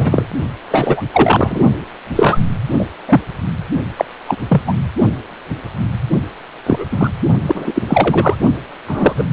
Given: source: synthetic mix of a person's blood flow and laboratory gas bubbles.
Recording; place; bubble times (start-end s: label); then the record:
Doppler ultrasound of blood flow; precordium
0.00-0.24 s: bubbles
0.70-1.02 s: bubbles
1.12-1.59 s: bubbles
2.15-2.38 s: bubbles
2.71-2.87 s: bubbles
3.07-3.21 s: bubbles
3.96-4.05 s: bubbles
4.27-4.36 s: bubbles
4.48-4.61 s: bubbles
4.67-4.73 s: bubbles
6.66-6.88 s: bubbles
6.92-7.10 s: bubbles
7.47-7.83 s: bubbles
7.87-8.36 s: bubbles
8.87-9.15 s: bubbles
9.18-9.24 s: bubbles
From the record:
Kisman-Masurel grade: 233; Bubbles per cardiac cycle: several, 3 to 8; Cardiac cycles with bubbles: 50 to 99%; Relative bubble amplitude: loud (0.450 to 0.775); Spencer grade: 3 (all of the cardiac periods contain showers or single bubble signals, but not dominating or overriding the cardiac motion signals); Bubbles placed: only in the low amplitude regions of the cardiac cycle